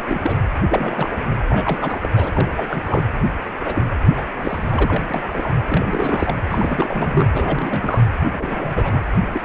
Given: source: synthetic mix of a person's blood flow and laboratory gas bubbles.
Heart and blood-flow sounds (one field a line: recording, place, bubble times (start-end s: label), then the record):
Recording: Doppler ultrasound of blood flow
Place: precordium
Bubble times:
0.00-0.04 s: bubbles
0.07-0.19 s: bubbles
0.22-0.39 s: bubbles
0.69-1.10 s: bubbles
1.17-1.25 s: bubbles
1.48-2.00 s: bubbles
2.03-2.08 s: bubbles
2.15-2.85 s: bubbles
2.88-3.04 s: bubbles
3.58-3.83 s: bubbles
4.17-4.23 s: bubbles
4.43-4.65 s: bubbles
4.70-5.28 s: bubbles
5.33-5.49 s: bubbles
5.68-6.37 s: bubbles
6.50-7.26 s: bubbles
7.33-8.03 s: bubbles
8.32-9.01 s: bubbles
9.22-9.28 s: bubbles
9.32-9.41 s: bubbles
From the record:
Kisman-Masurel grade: 342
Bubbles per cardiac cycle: rolling drumbeat, 9 or more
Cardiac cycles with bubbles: 100%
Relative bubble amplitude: moderate (0.250 to 0.450)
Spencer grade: 3 (all of the cardiac periods contain showers or single bubble signals, but not dominating or overriding the cardiac motion signals)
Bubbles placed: anywhere in the cardiac cycle